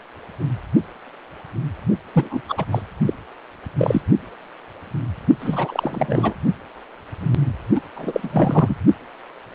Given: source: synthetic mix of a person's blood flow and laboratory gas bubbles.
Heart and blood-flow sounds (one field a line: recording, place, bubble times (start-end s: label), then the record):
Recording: Doppler ultrasound of blood flow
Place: precordium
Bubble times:
2.13-2.41 s: bubbles
2.49-2.66 s: bubbles
2.71-2.82 s: bubbles
3.06-3.13 s: bubbles
3.78-4.01 s: bubbles
5.40-6.34 s: bubbles
7.75-7.81 s: bubbles
7.95-8.76 s: bubbles
From the record:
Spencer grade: 3 (all of the cardiac periods contain showers or single bubble signals, but not dominating or overriding the cardiac motion signals)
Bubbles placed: only in the low amplitude regions of the cardiac cycle